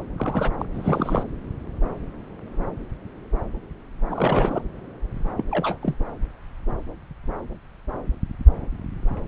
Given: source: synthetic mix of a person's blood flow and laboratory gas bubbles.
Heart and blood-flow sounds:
Doppler ultrasound of blood flow; subclavian vein
0.17-0.50 s: bubbles
0.59-0.66 s: bubbles
0.74-1.24 s: bubbles
4.09-4.62 s: bubbles
5.37-5.44 s: bubbles
5.51-5.78 s: bubbles
5.83-5.96 s: bubbles
From the record:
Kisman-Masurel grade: 221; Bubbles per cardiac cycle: several, 3 to 8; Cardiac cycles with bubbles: 10 to 50%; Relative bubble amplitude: barely perceptible (0.100 to 0.250); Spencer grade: 2 (many but less than half of the cardiac periods contain bubble signals, singularly or in groups); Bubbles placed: anywhere in the cardiac cycle

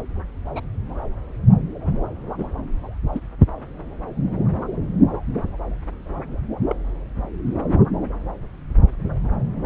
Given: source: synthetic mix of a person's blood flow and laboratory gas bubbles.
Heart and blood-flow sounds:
Doppler ultrasound of blood flow; subclavian vein
0.56-0.61 s: bubbles
1.84-1.97 s: bubbles
2.38-2.49 s: bubbles
3.13-3.22 s: bubbles
6.69-6.75 s: bubbles
From the record:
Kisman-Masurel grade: 121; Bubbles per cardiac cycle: 1 to 2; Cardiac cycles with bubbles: 10 to 50%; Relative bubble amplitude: barely perceptible (0.100 to 0.250); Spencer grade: 2 (many but less than half of the cardiac periods contain bubble signals, singularly or in groups); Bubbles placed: anywhere in the cardiac cycle

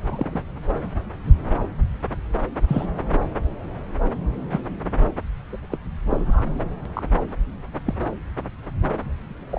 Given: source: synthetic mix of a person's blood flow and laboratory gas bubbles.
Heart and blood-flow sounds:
Doppler ultrasound of blood flow; subclavian vein
0.01-0.43 s: bubbles
2.68-2.87 s: bubbles
4.51-4.61 s: bubbles
5.52-5.57 s: bubbles
5.70-5.77 s: bubbles
6.10-6.44 s: bubbles
6.58-6.63 s: bubbles
6.85-7.02 s: bubbles
7.84-7.94 s: bubbles
9.51-9.58 s: bubbles
From the record:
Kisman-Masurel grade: 122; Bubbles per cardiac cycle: 1 to 2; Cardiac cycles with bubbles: 10 to 50%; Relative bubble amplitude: moderate (0.250 to 0.450); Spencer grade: 2 (many but less than half of the cardiac periods contain bubble signals, singularly or in groups); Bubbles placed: anywhere in the cardiac cycle

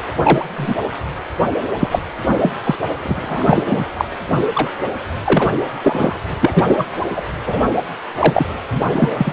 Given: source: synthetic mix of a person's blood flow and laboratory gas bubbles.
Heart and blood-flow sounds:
Doppler ultrasound of blood flow; precordium
0.22-0.45 s: bubbles
0.56-0.75 s: bubbles
1.79-2.00 s: bubbles
2.42-2.52 s: bubbles
2.64-2.76 s: bubbles
3.03-3.63 s: bubbles
3.67-3.85 s: bubbles
3.94-4.05 s: bubbles
4.35-4.45 s: bubbles
4.53-4.71 s: bubbles
5.24-5.50 s: bubbles
5.82-6.16 s: bubbles
6.40-6.86 s: bubbles
7.16-7.24 s: bubbles
7.46-7.61 s: bubbles
8.19-8.47 s: bubbles
8.70-8.81 s: bubbles
8.92-9.11 s: bubbles
9.18-9.33 s: bubbles
From the record:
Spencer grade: 3 (all of the cardiac periods contain showers or single bubble signals, but not dominating or overriding the cardiac motion signals); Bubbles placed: anywhere in the cardiac cycle

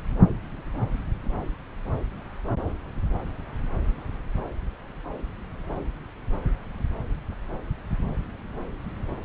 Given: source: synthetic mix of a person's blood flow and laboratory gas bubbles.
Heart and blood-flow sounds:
Doppler ultrasound of blood flow; subclavian vein
no bubbles
From the record:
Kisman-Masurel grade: 000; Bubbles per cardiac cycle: 0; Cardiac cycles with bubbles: 0%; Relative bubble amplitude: no bubbles discernible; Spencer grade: 0 (complete lack of bubble signals)

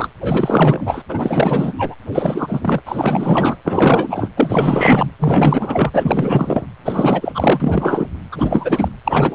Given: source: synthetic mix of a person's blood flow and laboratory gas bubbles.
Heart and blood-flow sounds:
Doppler ultrasound of blood flow; precordium
0.00-0.10 s: bubbles
0.20-1.03 s: bubbles
1.08-1.74 s: bubbles
1.78-1.95 s: bubbles
2.12-2.80 s: bubbles
2.85-3.57 s: bubbles
3.65-4.29 s: bubbles
4.36-5.11 s: bubbles
5.19-6.66 s: bubbles
6.85-8.05 s: bubbles
8.31-8.92 s: bubbles
9.04-9.35 s: bubbles
From the record:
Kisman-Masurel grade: 444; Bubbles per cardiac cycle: continuous sound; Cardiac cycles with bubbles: 100%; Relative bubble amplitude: maximal (0.775 to 0.999); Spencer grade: 4 (maximum detectable bubble signal sounding continuously throughout systole and diastole of every cardiac period, and overriding the amplitude of the normal cardiac signals); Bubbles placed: anywhere in the cardiac cycle

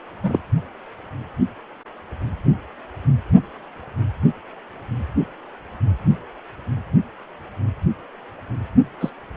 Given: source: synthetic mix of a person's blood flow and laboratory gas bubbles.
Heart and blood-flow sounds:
Doppler ultrasound of blood flow; precordium
0.22-0.40 s: bubbles
9.00-9.11 s: bubbles
From the record:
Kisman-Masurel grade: 122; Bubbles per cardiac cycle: 1 to 2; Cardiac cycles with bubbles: 10 to 50%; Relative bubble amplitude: moderate (0.250 to 0.450); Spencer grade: 2 (many but less than half of the cardiac periods contain bubble signals, singularly or in groups); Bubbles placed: only in the low amplitude regions of the cardiac cycle

